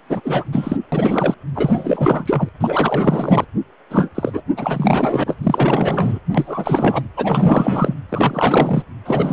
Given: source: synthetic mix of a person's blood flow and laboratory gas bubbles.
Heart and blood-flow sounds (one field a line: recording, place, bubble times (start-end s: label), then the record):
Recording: Doppler ultrasound of blood flow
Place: precordium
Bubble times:
0.10-0.44 s: bubbles
0.52-0.76 s: bubbles
0.92-1.34 s: bubbles
1.55-2.49 s: bubbles
2.60-3.45 s: bubbles
3.90-4.09 s: bubbles
4.15-4.43 s: bubbles
4.57-5.37 s: bubbles
5.43-6.20 s: bubbles
6.35-7.03 s: bubbles
7.16-7.94 s: bubbles
8.09-8.83 s: bubbles
9.05-9.33 s: bubbles
From the record:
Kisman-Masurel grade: 444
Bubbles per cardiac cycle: continuous sound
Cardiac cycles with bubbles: 100%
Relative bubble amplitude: maximal (0.775 to 0.999)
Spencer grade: 4 (maximum detectable bubble signal sounding continuously throughout systole and diastole of every cardiac period, and overriding the amplitude of the normal cardiac signals)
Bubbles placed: anywhere in the cardiac cycle